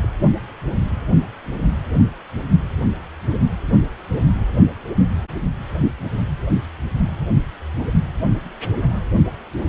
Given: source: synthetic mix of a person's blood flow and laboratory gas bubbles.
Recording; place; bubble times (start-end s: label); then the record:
Doppler ultrasound of blood flow; precordium
0.03-0.08 s: bubbles
From the record:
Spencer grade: 1 (occasional bubble signal discernible with the cardiac motion signal, with majority of cardiac periods free of bubbles); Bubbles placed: only in the low amplitude regions of the cardiac cycle